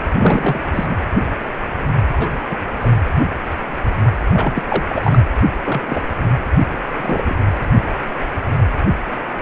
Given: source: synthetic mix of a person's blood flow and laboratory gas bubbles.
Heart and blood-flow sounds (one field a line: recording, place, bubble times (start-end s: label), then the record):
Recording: Doppler ultrasound of blood flow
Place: precordium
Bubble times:
0.18-0.97 s: bubbles
2.13-2.28 s: bubbles
2.48-2.56 s: bubbles
2.83-2.88 s: bubbles
4.33-4.62 s: bubbles
4.67-5.21 s: bubbles
5.66-6.03 s: bubbles
6.95-7.36 s: bubbles
From the record:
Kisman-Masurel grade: 232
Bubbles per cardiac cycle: several, 3 to 8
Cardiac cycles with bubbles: 50 to 99%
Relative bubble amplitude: moderate (0.250 to 0.450)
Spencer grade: 3 (all of the cardiac periods contain showers or single bubble signals, but not dominating or overriding the cardiac motion signals)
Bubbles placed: anywhere in the cardiac cycle